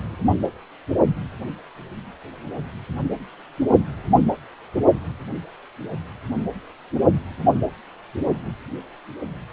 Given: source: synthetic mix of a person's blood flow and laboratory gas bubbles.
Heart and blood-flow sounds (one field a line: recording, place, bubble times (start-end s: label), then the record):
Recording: Doppler ultrasound of blood flow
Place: precordium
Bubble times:
no bubbles
From the record:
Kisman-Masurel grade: 000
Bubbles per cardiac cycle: 0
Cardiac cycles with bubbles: 0%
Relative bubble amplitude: no bubbles discernible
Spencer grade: 0 (complete lack of bubble signals)